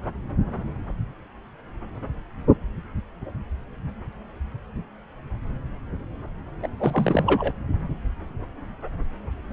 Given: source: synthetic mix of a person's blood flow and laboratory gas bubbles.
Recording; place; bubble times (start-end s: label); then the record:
Doppler ultrasound of blood flow; subclavian vein
6.62-6.67 s: bubbles
6.77-7.52 s: bubbles
From the record:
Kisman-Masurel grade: 212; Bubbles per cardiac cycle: several, 3 to 8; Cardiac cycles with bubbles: 1 to 10%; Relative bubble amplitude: moderate (0.250 to 0.450); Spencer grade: 1 (occasional bubble signal discernible with the cardiac motion signal, with majority of cardiac periods free of bubbles); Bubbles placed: anywhere in the cardiac cycle